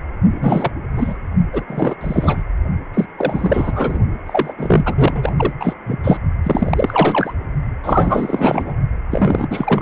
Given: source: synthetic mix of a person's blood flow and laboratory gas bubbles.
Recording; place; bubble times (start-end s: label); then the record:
Doppler ultrasound of blood flow; precordium
0.32-0.71 s: bubbles
0.95-1.17 s: bubbles
1.53-1.64 s: bubbles
1.67-1.95 s: bubbles
2.00-2.44 s: bubbles
2.94-3.06 s: bubbles
3.18-4.00 s: bubbles
4.26-4.54 s: bubbles
4.58-5.34 s: bubbles
5.38-5.53 s: bubbles
5.60-5.74 s: bubbles
5.84-6.00 s: bubbles
6.03-6.18 s: bubbles
6.44-7.33 s: bubbles
7.84-8.74 s: bubbles
9.11-9.82 s: bubbles
From the record:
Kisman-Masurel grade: 343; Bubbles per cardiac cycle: rolling drumbeat, 9 or more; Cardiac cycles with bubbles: 100%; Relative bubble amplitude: loud (0.450 to 0.775); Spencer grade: 3 (all of the cardiac periods contain showers or single bubble signals, but not dominating or overriding the cardiac motion signals); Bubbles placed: only in the low amplitude regions of the cardiac cycle